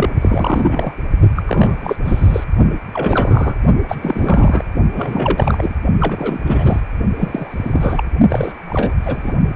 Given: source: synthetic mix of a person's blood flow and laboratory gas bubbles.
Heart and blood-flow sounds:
Doppler ultrasound of blood flow; precordium
0.00-0.09 s: bubbles
0.21-0.93 s: bubbles
1.35-1.44 s: bubbles
1.46-1.96 s: bubbles
2.04-2.44 s: bubbles
2.93-3.59 s: bubbles
3.88-4.65 s: bubbles
4.93-5.75 s: bubbles
6.00-6.41 s: bubbles
6.45-6.80 s: bubbles
7.17-8.04 s: bubbles
8.29-8.93 s: bubbles
9.02-9.32 s: bubbles
From the record:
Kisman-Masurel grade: 343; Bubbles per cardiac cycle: rolling drumbeat, 9 or more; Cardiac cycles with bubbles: 100%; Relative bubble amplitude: loud (0.450 to 0.775); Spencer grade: 3 (all of the cardiac periods contain showers or single bubble signals, but not dominating or overriding the cardiac motion signals); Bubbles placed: only in the low amplitude regions of the cardiac cycle

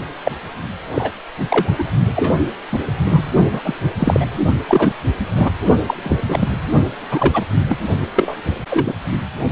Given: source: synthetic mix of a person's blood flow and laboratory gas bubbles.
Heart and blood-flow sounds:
Doppler ultrasound of blood flow; precordium
0.24-0.32 s: bubbles
0.94-1.12 s: bubbles
1.49-1.73 s: bubbles
1.78-1.84 s: bubbles
2.16-2.32 s: bubbles
2.72-2.84 s: bubbles
3.03-3.23 s: bubbles
3.52-3.61 s: bubbles
3.64-3.75 s: bubbles
4.00-4.25 s: bubbles
4.68-4.94 s: bubbles
5.36-5.50 s: bubbles
5.88-5.95 s: bubbles
6.04-6.17 s: bubbles
6.29-6.49 s: bubbles
7.11-7.45 s: bubbles
7.70-7.78 s: bubbles
8.15-8.41 s: bubbles
8.68-8.98 s: bubbles
From the record:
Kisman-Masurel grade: 243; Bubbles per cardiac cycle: several, 3 to 8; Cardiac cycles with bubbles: 100%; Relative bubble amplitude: loud (0.450 to 0.775); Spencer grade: 3 (all of the cardiac periods contain showers or single bubble signals, but not dominating or overriding the cardiac motion signals); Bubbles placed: only in the low amplitude regions of the cardiac cycle

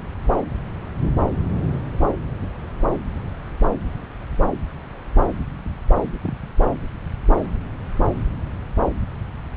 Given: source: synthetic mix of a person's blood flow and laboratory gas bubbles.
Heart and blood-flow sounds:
Doppler ultrasound of blood flow; subclavian vein
6.23-6.33 s: bubbles
From the record:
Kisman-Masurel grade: 111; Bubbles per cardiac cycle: 1 to 2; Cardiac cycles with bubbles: 1 to 10%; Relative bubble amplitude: barely perceptible (0.100 to 0.250); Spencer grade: 1 (occasional bubble signal discernible with the cardiac motion signal, with majority of cardiac periods free of bubbles); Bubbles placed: anywhere in the cardiac cycle

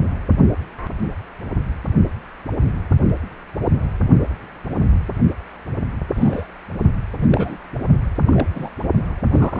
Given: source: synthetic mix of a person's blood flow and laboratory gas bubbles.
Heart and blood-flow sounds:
Doppler ultrasound of blood flow; precordium
6.15-6.46 s: bubbles
7.20-7.57 s: bubbles
8.25-8.48 s: bubbles
8.52-8.69 s: bubbles
9.31-9.60 s: bubbles
From the record:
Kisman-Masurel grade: 232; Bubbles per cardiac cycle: several, 3 to 8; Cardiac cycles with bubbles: 50 to 99%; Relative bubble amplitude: moderate (0.250 to 0.450); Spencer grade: 3 (all of the cardiac periods contain showers or single bubble signals, but not dominating or overriding the cardiac motion signals); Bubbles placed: only in the low amplitude regions of the cardiac cycle

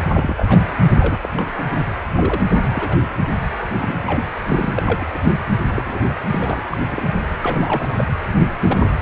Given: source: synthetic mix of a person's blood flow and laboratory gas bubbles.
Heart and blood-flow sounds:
Doppler ultrasound of blood flow; precordium
0.13-0.66 s: bubbles
0.86-1.20 s: bubbles
1.23-1.28 s: bubbles
1.33-1.63 s: bubbles
1.71-1.87 s: bubbles
2.06-2.42 s: bubbles
2.73-3.04 s: bubbles
3.17-3.26 s: bubbles
3.80-3.96 s: bubbles
4.07-4.25 s: bubbles
4.47-5.07 s: bubbles
5.13-5.19 s: bubbles
5.71-5.99 s: bubbles
6.29-6.59 s: bubbles
6.71-6.79 s: bubbles
6.91-7.30 s: bubbles
7.42-7.93 s: bubbles
7.96-8.04 s: bubbles
8.61-8.90 s: bubbles
From the record:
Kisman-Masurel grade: 242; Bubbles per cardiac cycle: several, 3 to 8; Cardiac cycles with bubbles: 100%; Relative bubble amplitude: moderate (0.250 to 0.450); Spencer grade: 3 (all of the cardiac periods contain showers or single bubble signals, but not dominating or overriding the cardiac motion signals); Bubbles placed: anywhere in the cardiac cycle

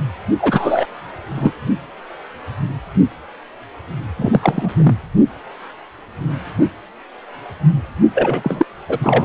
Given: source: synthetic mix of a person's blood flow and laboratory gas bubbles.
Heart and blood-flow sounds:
Doppler ultrasound of blood flow; precordium
0.38-0.86 s: bubbles
1.35-1.54 s: bubbles
4.17-4.70 s: bubbles
4.78-4.95 s: bubbles
8.14-8.65 s: bubbles
8.88-8.98 s: bubbles
9.03-9.25 s: bubbles
From the record:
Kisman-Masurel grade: 233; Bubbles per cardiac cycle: several, 3 to 8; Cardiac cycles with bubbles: 50 to 99%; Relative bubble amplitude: loud (0.450 to 0.775); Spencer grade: 3 (all of the cardiac periods contain showers or single bubble signals, but not dominating or overriding the cardiac motion signals); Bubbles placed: only in the low amplitude regions of the cardiac cycle

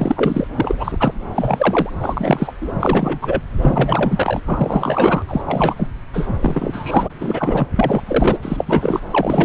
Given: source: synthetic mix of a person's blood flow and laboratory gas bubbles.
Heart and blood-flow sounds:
Doppler ultrasound of blood flow; subclavian vein
0.00-0.47 s: bubbles
0.55-1.14 s: bubbles
1.34-1.90 s: bubbles
2.00-2.52 s: bubbles
2.61-2.72 s: bubbles
2.79-3.42 s: bubbles
3.62-4.41 s: bubbles
4.46-5.23 s: bubbles
5.28-5.42 s: bubbles
5.46-5.87 s: bubbles
6.13-6.35 s: bubbles
6.40-7.09 s: bubbles
7.20-7.67 s: bubbles
7.75-8.02 s: bubbles
8.07-8.38 s: bubbles
8.42-9.00 s: bubbles
9.11-9.45 s: bubbles
From the record:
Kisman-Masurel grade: 342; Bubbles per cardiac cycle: rolling drumbeat, 9 or more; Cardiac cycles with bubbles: 100%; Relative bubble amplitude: moderate (0.250 to 0.450); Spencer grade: 3 (all of the cardiac periods contain showers or single bubble signals, but not dominating or overriding the cardiac motion signals); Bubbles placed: anywhere in the cardiac cycle

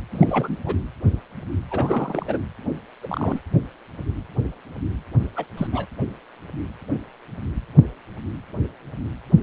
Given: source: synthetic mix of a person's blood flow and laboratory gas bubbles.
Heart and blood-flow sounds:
Doppler ultrasound of blood flow; precordium
0.11-0.75 s: bubbles
1.70-2.38 s: bubbles
3.03-3.40 s: bubbles
5.36-5.45 s: bubbles
5.57-5.67 s: bubbles
5.72-5.87 s: bubbles
From the record:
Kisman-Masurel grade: 221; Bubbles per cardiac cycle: several, 3 to 8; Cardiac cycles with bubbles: 10 to 50%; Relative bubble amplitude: barely perceptible (0.100 to 0.250); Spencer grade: 2 (many but less than half of the cardiac periods contain bubble signals, singularly or in groups); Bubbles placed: anywhere in the cardiac cycle

